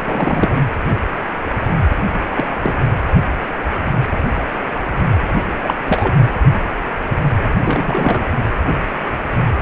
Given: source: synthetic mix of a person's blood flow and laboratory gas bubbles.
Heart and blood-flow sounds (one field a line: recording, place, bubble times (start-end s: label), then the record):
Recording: Doppler ultrasound of blood flow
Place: precordium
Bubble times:
0.04-0.52 s: bubbles
2.35-2.47 s: bubbles
2.63-2.73 s: bubbles
5.64-5.74 s: bubbles
5.86-6.17 s: bubbles
7.65-8.26 s: bubbles
From the record:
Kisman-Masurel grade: 222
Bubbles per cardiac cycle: several, 3 to 8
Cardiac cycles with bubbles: 10 to 50%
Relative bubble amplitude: moderate (0.250 to 0.450)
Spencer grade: 2 (many but less than half of the cardiac periods contain bubble signals, singularly or in groups)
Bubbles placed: anywhere in the cardiac cycle